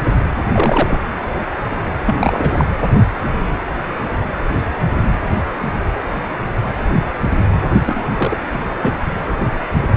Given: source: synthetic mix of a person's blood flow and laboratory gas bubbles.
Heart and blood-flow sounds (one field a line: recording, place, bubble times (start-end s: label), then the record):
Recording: Doppler ultrasound of blood flow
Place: precordium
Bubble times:
0.52-1.00 s: bubbles
2.06-2.15 s: bubbles
2.19-2.65 s: bubbles
7.86-8.03 s: bubbles
8.17-8.38 s: bubbles
8.54-8.62 s: bubbles
8.81-8.94 s: bubbles
From the record:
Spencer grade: 2 (many but less than half of the cardiac periods contain bubble signals, singularly or in groups)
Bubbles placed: anywhere in the cardiac cycle